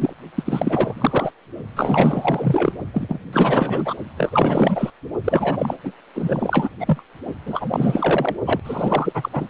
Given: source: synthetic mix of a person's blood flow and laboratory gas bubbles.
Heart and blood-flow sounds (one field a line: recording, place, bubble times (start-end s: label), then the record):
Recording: Doppler ultrasound of blood flow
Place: precordium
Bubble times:
0.00-0.13 s: bubbles
0.35-1.31 s: bubbles
1.75-2.73 s: bubbles
2.93-3.20 s: bubbles
3.33-3.94 s: bubbles
4.17-4.90 s: bubbles
5.24-5.75 s: bubbles
5.83-5.92 s: bubbles
6.15-6.69 s: bubbles
6.79-7.02 s: bubbles
7.46-8.35 s: bubbles
8.45-8.60 s: bubbles
8.64-9.29 s: bubbles
9.33-9.48 s: bubbles
From the record:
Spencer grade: 4 (maximum detectable bubble signal sounding continuously throughout systole and diastole of every cardiac period, and overriding the amplitude of the normal cardiac signals)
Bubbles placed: only in the low amplitude regions of the cardiac cycle